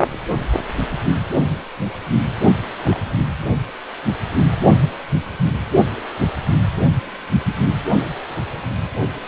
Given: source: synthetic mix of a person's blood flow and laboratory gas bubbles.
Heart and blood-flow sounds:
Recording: Doppler ultrasound of blood flow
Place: precordium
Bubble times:
2.81-3.23 s: bubbles
From the record:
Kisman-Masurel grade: 111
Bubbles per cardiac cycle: 1 to 2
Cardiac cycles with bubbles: 1 to 10%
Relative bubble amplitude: barely perceptible (0.100 to 0.250)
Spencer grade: 1 (occasional bubble signal discernible with the cardiac motion signal, with majority of cardiac periods free of bubbles)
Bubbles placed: only in the low amplitude regions of the cardiac cycle

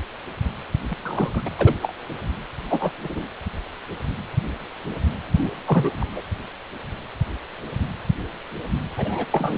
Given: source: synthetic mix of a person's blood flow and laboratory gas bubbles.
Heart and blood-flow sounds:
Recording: Doppler ultrasound of blood flow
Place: precordium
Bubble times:
0.91-0.95 s: bubbles
1.00-1.48 s: bubbles
1.57-1.76 s: bubbles
1.82-1.94 s: bubbles
2.70-2.90 s: bubbles
3.02-3.27 s: bubbles
5.38-5.49 s: bubbles
5.66-5.90 s: bubbles
6.00-6.22 s: bubbles
8.97-9.25 s: bubbles
9.31-9.57 s: bubbles
From the record:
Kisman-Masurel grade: 222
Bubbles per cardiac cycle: several, 3 to 8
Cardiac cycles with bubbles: 10 to 50%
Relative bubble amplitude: moderate (0.250 to 0.450)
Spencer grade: 2 (many but less than half of the cardiac periods contain bubble signals, singularly or in groups)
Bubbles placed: anywhere in the cardiac cycle

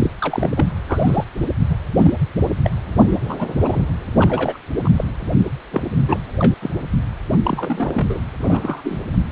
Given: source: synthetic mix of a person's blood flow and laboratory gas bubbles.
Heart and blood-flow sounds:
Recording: Doppler ultrasound of blood flow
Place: precordium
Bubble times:
0.00-0.10 s: bubbles
0.21-0.72 s: bubbles
0.89-1.24 s: bubbles
1.68-1.76 s: bubbles
1.95-2.13 s: bubbles
2.63-2.71 s: bubbles
2.89-3.18 s: bubbles
3.29-3.47 s: bubbles
3.60-3.82 s: bubbles
4.19-4.58 s: bubbles
4.85-4.89 s: bubbles
4.98-5.04 s: bubbles
5.71-5.83 s: bubbles
6.04-6.20 s: bubbles
6.39-6.54 s: bubbles
6.61-6.71 s: bubbles
7.44-8.21 s: bubbles
8.38-8.99 s: bubbles
From the record:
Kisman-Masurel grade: 242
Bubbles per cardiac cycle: several, 3 to 8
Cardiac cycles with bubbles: 100%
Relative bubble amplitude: moderate (0.250 to 0.450)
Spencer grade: 3 (all of the cardiac periods contain showers or single bubble signals, but not dominating or overriding the cardiac motion signals)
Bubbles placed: anywhere in the cardiac cycle

